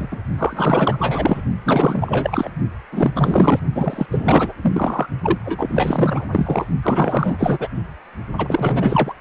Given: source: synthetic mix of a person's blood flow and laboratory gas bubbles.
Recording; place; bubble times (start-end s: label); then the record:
Doppler ultrasound of blood flow; precordium
0.00-0.18 s: bubbles
0.38-1.42 s: bubbles
1.65-2.48 s: bubbles
2.92-3.12 s: bubbles
3.15-3.59 s: bubbles
3.75-4.06 s: bubbles
4.11-4.53 s: bubbles
4.62-5.07 s: bubbles
5.22-5.38 s: bubbles
5.42-6.25 s: bubbles
6.32-6.66 s: bubbles
6.83-7.69 s: bubbles
8.38-9.13 s: bubbles
From the record:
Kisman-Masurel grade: 444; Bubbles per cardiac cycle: continuous sound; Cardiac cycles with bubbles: 100%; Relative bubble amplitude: maximal (0.775 to 0.999); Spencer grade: 4 (maximum detectable bubble signal sounding continuously throughout systole and diastole of every cardiac period, and overriding the amplitude of the normal cardiac signals); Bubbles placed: only in the low amplitude regions of the cardiac cycle